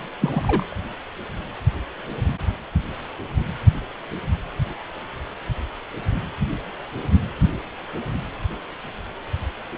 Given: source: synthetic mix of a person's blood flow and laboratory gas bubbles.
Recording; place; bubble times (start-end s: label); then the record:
Doppler ultrasound of blood flow; precordium
0.21-0.76 s: bubbles
From the record:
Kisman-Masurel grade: 122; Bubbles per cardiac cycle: 1 to 2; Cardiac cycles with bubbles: 10 to 50%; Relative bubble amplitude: moderate (0.250 to 0.450); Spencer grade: 2 (many but less than half of the cardiac periods contain bubble signals, singularly or in groups); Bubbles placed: anywhere in the cardiac cycle